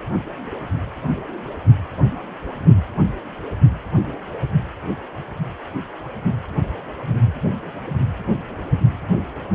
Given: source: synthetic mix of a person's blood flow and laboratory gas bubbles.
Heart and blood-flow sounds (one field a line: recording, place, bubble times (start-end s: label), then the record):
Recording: Doppler ultrasound of blood flow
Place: precordium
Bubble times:
no bubbles
From the record:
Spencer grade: 0 (complete lack of bubble signals)